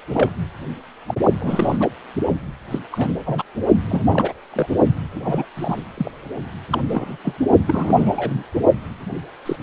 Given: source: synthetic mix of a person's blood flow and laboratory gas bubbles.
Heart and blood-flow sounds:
Doppler ultrasound of blood flow; precordium
0.13-0.31 s: bubbles
1.07-1.15 s: bubbles
1.40-1.89 s: bubbles
2.71-2.79 s: bubbles
2.92-3.10 s: bubbles
3.26-3.43 s: bubbles
3.86-4.33 s: bubbles
4.53-4.67 s: bubbles
5.15-5.21 s: bubbles
5.24-5.45 s: bubbles
5.56-5.84 s: bubbles
5.97-6.11 s: bubbles
6.71-6.82 s: bubbles
6.88-7.17 s: bubbles
7.24-7.35 s: bubbles
7.67-8.43 s: bubbles
9.46-9.56 s: bubbles
From the record:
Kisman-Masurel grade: 242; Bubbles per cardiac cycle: several, 3 to 8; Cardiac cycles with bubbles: 100%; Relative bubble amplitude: moderate (0.250 to 0.450); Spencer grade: 3 (all of the cardiac periods contain showers or single bubble signals, but not dominating or overriding the cardiac motion signals); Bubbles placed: only in the low amplitude regions of the cardiac cycle

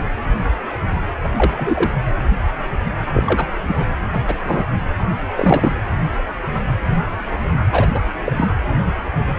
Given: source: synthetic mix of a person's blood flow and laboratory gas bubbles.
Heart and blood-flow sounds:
Doppler ultrasound of blood flow; precordium
1.22-1.30 s: bubbles
1.35-1.91 s: bubbles
3.13-3.23 s: bubbles
3.26-3.48 s: bubbles
3.68-3.75 s: bubbles
3.80-3.85 s: bubbles
4.13-4.20 s: bubbles
4.26-4.35 s: bubbles
4.43-4.64 s: bubbles
5.35-5.72 s: bubbles
7.71-7.88 s: bubbles
7.94-8.01 s: bubbles
8.24-8.32 s: bubbles
8.36-8.49 s: bubbles
From the record:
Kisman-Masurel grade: 223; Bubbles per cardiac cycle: several, 3 to 8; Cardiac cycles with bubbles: 10 to 50%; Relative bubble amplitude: loud (0.450 to 0.775); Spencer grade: 2 (many but less than half of the cardiac periods contain bubble signals, singularly or in groups); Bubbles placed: anywhere in the cardiac cycle

